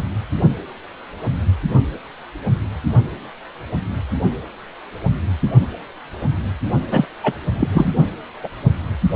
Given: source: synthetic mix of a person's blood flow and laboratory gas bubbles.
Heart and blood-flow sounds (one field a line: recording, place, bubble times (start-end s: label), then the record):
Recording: Doppler ultrasound of blood flow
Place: precordium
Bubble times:
6.91-7.05 s: bubbles
7.23-7.33 s: bubbles
7.59-7.92 s: bubbles
8.43-8.48 s: bubbles
From the record:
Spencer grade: 1 (occasional bubble signal discernible with the cardiac motion signal, with majority of cardiac periods free of bubbles)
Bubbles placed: only in the low amplitude regions of the cardiac cycle